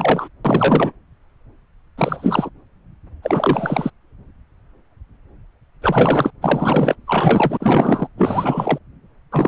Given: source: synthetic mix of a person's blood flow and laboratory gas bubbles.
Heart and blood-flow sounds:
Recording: Doppler ultrasound of blood flow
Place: subclavian vein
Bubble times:
0.00-0.29 s: bubbles
0.45-0.92 s: bubbles
1.98-2.50 s: bubbles
3.22-3.90 s: bubbles
5.82-6.30 s: bubbles
6.42-6.96 s: bubbles
7.08-7.58 s: bubbles
7.60-8.07 s: bubbles
8.17-8.78 s: bubbles
9.31-9.48 s: bubbles
From the record:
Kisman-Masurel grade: 333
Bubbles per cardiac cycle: rolling drumbeat, 9 or more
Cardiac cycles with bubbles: 50 to 99%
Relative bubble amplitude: loud (0.450 to 0.775)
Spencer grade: 3 (all of the cardiac periods contain showers or single bubble signals, but not dominating or overriding the cardiac motion signals)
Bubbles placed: anywhere in the cardiac cycle

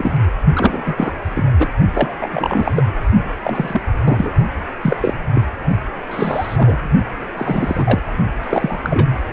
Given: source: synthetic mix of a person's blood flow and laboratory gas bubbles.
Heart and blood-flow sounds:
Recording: Doppler ultrasound of blood flow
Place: precordium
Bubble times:
0.00-0.17 s: bubbles
0.55-0.82 s: bubbles
0.86-1.12 s: bubbles
1.35-1.44 s: bubbles
1.58-1.69 s: bubbles
1.93-2.27 s: bubbles
2.31-2.85 s: bubbles
3.43-3.81 s: bubbles
4.04-4.33 s: bubbles
4.81-4.96 s: bubbles
5.02-5.13 s: bubbles
5.33-5.42 s: bubbles
6.11-6.91 s: bubbles
7.37-8.02 s: bubbles
8.42-8.81 s: bubbles
8.84-9.24 s: bubbles
From the record:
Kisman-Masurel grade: 242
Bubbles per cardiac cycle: several, 3 to 8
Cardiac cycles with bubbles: 100%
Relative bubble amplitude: moderate (0.250 to 0.450)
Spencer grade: 3 (all of the cardiac periods contain showers or single bubble signals, but not dominating or overriding the cardiac motion signals)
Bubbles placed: only in the low amplitude regions of the cardiac cycle

